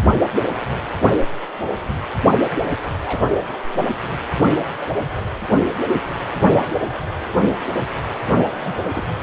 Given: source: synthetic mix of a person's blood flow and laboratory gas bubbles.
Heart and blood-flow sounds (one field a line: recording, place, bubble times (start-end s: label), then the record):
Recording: Doppler ultrasound of blood flow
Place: precordium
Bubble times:
3.05-3.25 s: bubbles
8.61-8.91 s: bubbles
8.95-9.07 s: bubbles
From the record:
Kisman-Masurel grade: 121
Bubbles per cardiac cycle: 1 to 2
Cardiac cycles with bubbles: 10 to 50%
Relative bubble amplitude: barely perceptible (0.100 to 0.250)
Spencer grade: 2 (many but less than half of the cardiac periods contain bubble signals, singularly or in groups)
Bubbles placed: anywhere in the cardiac cycle